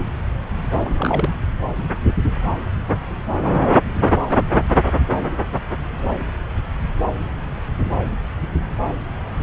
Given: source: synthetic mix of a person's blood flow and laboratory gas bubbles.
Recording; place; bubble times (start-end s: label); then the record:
Doppler ultrasound of blood flow; subclavian vein
0.85-1.29 s: bubbles
From the record:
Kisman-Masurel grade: 212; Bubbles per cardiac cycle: several, 3 to 8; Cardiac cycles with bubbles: 1 to 10%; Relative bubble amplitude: moderate (0.250 to 0.450); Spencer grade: 1 (occasional bubble signal discernible with the cardiac motion signal, with majority of cardiac periods free of bubbles); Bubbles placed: anywhere in the cardiac cycle